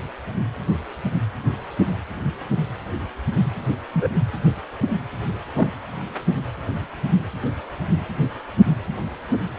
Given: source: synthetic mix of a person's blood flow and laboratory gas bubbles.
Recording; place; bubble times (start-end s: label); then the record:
Doppler ultrasound of blood flow; precordium
3.93-4.08 s: bubbles
5.57-5.69 s: bubbles
From the record:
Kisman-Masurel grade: 122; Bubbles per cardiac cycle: 1 to 2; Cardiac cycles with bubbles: 10 to 50%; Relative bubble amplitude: moderate (0.250 to 0.450); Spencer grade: 2 (many but less than half of the cardiac periods contain bubble signals, singularly or in groups); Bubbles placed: anywhere in the cardiac cycle